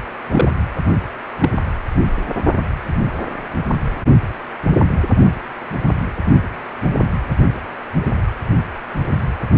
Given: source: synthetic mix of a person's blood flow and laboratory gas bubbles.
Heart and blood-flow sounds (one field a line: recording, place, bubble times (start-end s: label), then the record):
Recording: Doppler ultrasound of blood flow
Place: precordium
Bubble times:
0.31-0.52 s: bubbles
1.40-1.49 s: bubbles
From the record:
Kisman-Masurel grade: 122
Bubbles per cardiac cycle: 1 to 2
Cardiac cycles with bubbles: 10 to 50%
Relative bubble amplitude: moderate (0.250 to 0.450)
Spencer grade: 2 (many but less than half of the cardiac periods contain bubble signals, singularly or in groups)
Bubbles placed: anywhere in the cardiac cycle